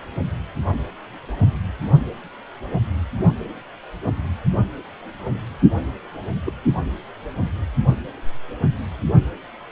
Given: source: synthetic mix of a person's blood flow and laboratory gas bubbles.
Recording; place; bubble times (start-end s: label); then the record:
Doppler ultrasound of blood flow; precordium
6.44-6.53 s: bubbles
From the record:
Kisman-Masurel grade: 111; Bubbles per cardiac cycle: 1 to 2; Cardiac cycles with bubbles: 1 to 10%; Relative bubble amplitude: barely perceptible (0.100 to 0.250); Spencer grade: 1 (occasional bubble signal discernible with the cardiac motion signal, with majority of cardiac periods free of bubbles); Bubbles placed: only in the low amplitude regions of the cardiac cycle